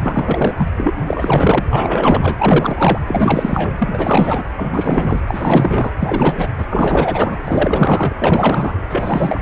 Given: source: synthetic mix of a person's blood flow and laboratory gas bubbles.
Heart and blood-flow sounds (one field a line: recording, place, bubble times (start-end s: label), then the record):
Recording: Doppler ultrasound of blood flow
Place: precordium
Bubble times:
0.00-0.68 s: bubbles
0.78-0.91 s: bubbles
0.96-1.02 s: bubbles
1.06-1.65 s: bubbles
1.70-2.99 s: bubbles
3.06-3.75 s: bubbles
3.78-4.43 s: bubbles
4.57-5.23 s: bubbles
5.26-5.92 s: bubbles
6.00-6.50 s: bubbles
6.58-6.66 s: bubbles
6.70-7.40 s: bubbles
7.45-8.16 s: bubbles
8.18-8.73 s: bubbles
8.89-9.42 s: bubbles
From the record:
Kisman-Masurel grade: 444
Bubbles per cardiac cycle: continuous sound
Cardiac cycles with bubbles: 100%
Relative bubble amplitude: maximal (0.775 to 0.999)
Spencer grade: 4 (maximum detectable bubble signal sounding continuously throughout systole and diastole of every cardiac period, and overriding the amplitude of the normal cardiac signals)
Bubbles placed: anywhere in the cardiac cycle